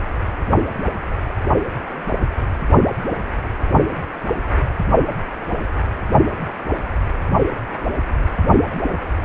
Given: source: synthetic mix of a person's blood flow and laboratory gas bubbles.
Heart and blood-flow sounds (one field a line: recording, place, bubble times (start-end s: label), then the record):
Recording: Doppler ultrasound of blood flow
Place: precordium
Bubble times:
8.88-9.00 s: bubbles
From the record:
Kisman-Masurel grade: 111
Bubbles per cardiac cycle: 1 to 2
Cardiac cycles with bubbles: 1 to 10%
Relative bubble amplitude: barely perceptible (0.100 to 0.250)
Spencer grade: 1 (occasional bubble signal discernible with the cardiac motion signal, with majority of cardiac periods free of bubbles)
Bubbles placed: only in the low amplitude regions of the cardiac cycle